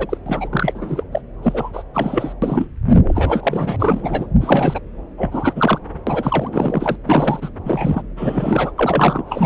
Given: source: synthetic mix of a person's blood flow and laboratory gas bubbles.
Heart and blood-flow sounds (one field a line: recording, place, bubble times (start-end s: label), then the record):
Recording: Doppler ultrasound of blood flow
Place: subclavian vein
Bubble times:
0.00-0.17 s: bubbles
0.26-0.49 s: bubbles
0.52-1.04 s: bubbles
1.12-1.21 s: bubbles
1.43-1.84 s: bubbles
1.94-2.33 s: bubbles
2.42-2.67 s: bubbles
3.08-3.76 s: bubbles
3.78-4.26 s: bubbles
4.41-4.79 s: bubbles
5.18-5.53 s: bubbles
5.56-5.79 s: bubbles
6.07-6.49 s: bubbles
6.52-6.96 s: bubbles
7.04-7.49 s: bubbles
7.65-8.02 s: bubbles
8.17-8.71 s: bubbles
8.78-9.22 s: bubbles
9.26-9.46 s: bubbles
From the record:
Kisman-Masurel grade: 342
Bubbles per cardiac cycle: rolling drumbeat, 9 or more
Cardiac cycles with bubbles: 100%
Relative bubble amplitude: moderate (0.250 to 0.450)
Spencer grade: 3 (all of the cardiac periods contain showers or single bubble signals, but not dominating or overriding the cardiac motion signals)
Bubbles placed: anywhere in the cardiac cycle